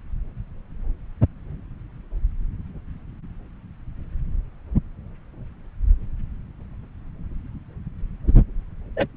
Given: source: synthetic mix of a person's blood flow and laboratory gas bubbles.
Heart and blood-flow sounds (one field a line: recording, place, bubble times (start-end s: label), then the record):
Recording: Doppler ultrasound of blood flow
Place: subclavian vein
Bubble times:
8.27-8.31 s: bubbles
8.96-9.06 s: bubbles
From the record:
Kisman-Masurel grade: 113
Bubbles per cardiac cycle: 1 to 2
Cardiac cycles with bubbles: 1 to 10%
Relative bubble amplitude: loud (0.450 to 0.775)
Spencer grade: 1 (occasional bubble signal discernible with the cardiac motion signal, with majority of cardiac periods free of bubbles)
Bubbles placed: anywhere in the cardiac cycle